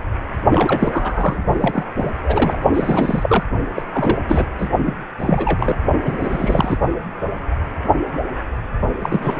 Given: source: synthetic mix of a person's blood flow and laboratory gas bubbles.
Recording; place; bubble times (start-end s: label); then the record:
Doppler ultrasound of blood flow; precordium
0.49-1.41 s: bubbles
1.53-1.88 s: bubbles
1.95-2.11 s: bubbles
2.23-2.58 s: bubbles
2.74-3.46 s: bubbles
3.75-3.82 s: bubbles
3.92-4.18 s: bubbles
4.27-4.46 s: bubbles
4.58-4.69 s: bubbles
4.79-4.93 s: bubbles
5.18-5.76 s: bubbles
6.05-6.78 s: bubbles
9.02-9.38 s: bubbles
From the record:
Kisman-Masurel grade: 332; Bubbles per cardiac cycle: rolling drumbeat, 9 or more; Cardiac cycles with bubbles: 50 to 99%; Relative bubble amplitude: moderate (0.250 to 0.450); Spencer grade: 3 (all of the cardiac periods contain showers or single bubble signals, but not dominating or overriding the cardiac motion signals); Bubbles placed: only in the low amplitude regions of the cardiac cycle